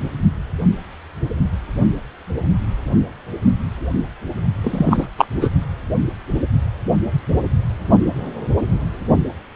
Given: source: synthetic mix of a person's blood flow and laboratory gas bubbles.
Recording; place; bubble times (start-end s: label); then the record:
Doppler ultrasound of blood flow; precordium
4.62-5.08 s: bubbles
5.17-5.25 s: bubbles
5.41-5.49 s: bubbles
From the record:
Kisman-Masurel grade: 213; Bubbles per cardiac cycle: several, 3 to 8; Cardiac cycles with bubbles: 1 to 10%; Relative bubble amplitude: loud (0.450 to 0.775); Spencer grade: 1 (occasional bubble signal discernible with the cardiac motion signal, with majority of cardiac periods free of bubbles); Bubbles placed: only in the low amplitude regions of the cardiac cycle